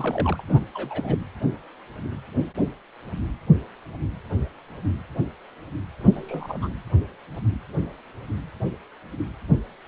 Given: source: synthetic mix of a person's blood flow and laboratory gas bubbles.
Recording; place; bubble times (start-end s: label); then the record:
Doppler ultrasound of blood flow; precordium
0.00-0.43 s: bubbles
0.49-0.61 s: bubbles
0.74-1.19 s: bubbles
6.00-6.74 s: bubbles
From the record:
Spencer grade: 2 (many but less than half of the cardiac periods contain bubble signals, singularly or in groups); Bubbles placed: anywhere in the cardiac cycle